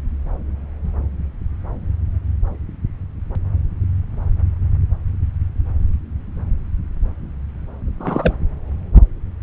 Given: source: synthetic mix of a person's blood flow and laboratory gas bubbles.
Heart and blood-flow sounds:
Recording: Doppler ultrasound of blood flow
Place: subclavian vein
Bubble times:
8.00-8.36 s: bubbles
From the record:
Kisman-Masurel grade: 213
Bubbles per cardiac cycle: several, 3 to 8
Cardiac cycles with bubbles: 1 to 10%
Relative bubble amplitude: loud (0.450 to 0.775)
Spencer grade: 1 (occasional bubble signal discernible with the cardiac motion signal, with majority of cardiac periods free of bubbles)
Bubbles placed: anywhere in the cardiac cycle

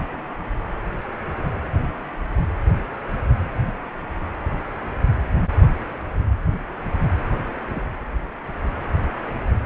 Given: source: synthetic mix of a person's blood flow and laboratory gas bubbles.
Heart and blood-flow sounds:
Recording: Doppler ultrasound of blood flow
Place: precordium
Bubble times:
7.69-7.80 s: bubbles
From the record:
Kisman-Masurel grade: 111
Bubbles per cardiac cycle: 1 to 2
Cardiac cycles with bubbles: 1 to 10%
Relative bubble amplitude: barely perceptible (0.100 to 0.250)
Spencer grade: 1 (occasional bubble signal discernible with the cardiac motion signal, with majority of cardiac periods free of bubbles)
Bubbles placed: anywhere in the cardiac cycle

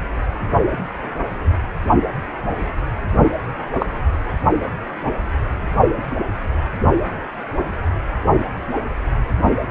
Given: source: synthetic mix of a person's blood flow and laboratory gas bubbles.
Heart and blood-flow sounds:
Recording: Doppler ultrasound of blood flow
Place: precordium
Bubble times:
3.79-3.86 s: bubbles
From the record:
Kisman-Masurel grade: 113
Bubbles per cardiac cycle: 1 to 2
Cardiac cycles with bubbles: 1 to 10%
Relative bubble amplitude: loud (0.450 to 0.775)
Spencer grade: 1 (occasional bubble signal discernible with the cardiac motion signal, with majority of cardiac periods free of bubbles)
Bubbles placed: only in the low amplitude regions of the cardiac cycle

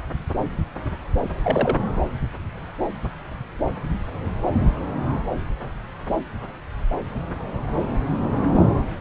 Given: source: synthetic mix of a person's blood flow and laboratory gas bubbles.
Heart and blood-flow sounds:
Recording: Doppler ultrasound of blood flow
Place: subclavian vein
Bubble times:
1.44-1.77 s: bubbles
From the record:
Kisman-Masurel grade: 112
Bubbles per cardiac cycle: 1 to 2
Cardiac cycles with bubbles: 1 to 10%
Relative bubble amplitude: moderate (0.250 to 0.450)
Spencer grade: 1 (occasional bubble signal discernible with the cardiac motion signal, with majority of cardiac periods free of bubbles)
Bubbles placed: anywhere in the cardiac cycle

